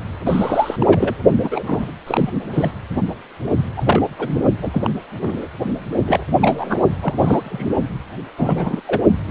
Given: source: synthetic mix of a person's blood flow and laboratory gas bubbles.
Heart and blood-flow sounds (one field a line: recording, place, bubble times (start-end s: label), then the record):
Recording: Doppler ultrasound of blood flow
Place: precordium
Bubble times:
0.26-0.76 s: bubbles
0.79-1.14 s: bubbles
1.43-1.64 s: bubbles
1.67-1.91 s: bubbles
2.07-2.30 s: bubbles
2.53-2.71 s: bubbles
2.96-3.07 s: bubbles
3.77-3.83 s: bubbles
3.86-4.03 s: bubbles
4.19-4.41 s: bubbles
4.62-4.71 s: bubbles
4.73-4.90 s: bubbles
5.21-5.48 s: bubbles
6.06-6.24 s: bubbles
6.41-6.79 s: bubbles
7.00-7.13 s: bubbles
7.19-7.80 s: bubbles
8.38-8.80 s: bubbles
8.87-9.02 s: bubbles
9.26-9.31 s: bubbles
From the record:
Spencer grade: 3 (all of the cardiac periods contain showers or single bubble signals, but not dominating or overriding the cardiac motion signals)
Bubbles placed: only in the low amplitude regions of the cardiac cycle